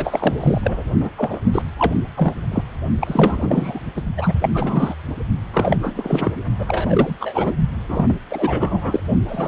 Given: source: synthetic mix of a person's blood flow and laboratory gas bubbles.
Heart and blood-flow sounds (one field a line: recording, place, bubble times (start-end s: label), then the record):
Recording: Doppler ultrasound of blood flow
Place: precordium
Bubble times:
0.00-0.83 s: bubbles
1.00-1.09 s: bubbles
1.18-1.41 s: bubbles
1.52-1.62 s: bubbles
1.79-1.96 s: bubbles
2.15-2.63 s: bubbles
3.00-3.80 s: bubbles
3.96-4.02 s: bubbles
4.17-4.34 s: bubbles
4.42-4.49 s: bubbles
4.54-4.95 s: bubbles
5.53-6.31 s: bubbles
6.60-7.17 s: bubbles
7.20-7.54 s: bubbles
7.88-8.20 s: bubbles
8.30-9.00 s: bubbles
9.28-9.48 s: bubbles
From the record:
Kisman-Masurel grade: 343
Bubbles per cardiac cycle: rolling drumbeat, 9 or more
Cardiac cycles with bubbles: 100%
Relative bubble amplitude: loud (0.450 to 0.775)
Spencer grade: 3 (all of the cardiac periods contain showers or single bubble signals, but not dominating or overriding the cardiac motion signals)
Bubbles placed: only in the low amplitude regions of the cardiac cycle